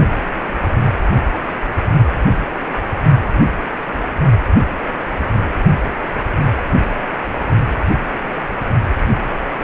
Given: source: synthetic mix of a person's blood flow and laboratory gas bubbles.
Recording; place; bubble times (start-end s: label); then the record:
Doppler ultrasound of blood flow; precordium
6.57-6.62 s: bubbles
From the record:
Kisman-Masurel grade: 111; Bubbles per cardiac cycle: 1 to 2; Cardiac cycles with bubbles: 1 to 10%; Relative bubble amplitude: barely perceptible (0.100 to 0.250); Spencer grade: 1 (occasional bubble signal discernible with the cardiac motion signal, with majority of cardiac periods free of bubbles); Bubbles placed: only in the low amplitude regions of the cardiac cycle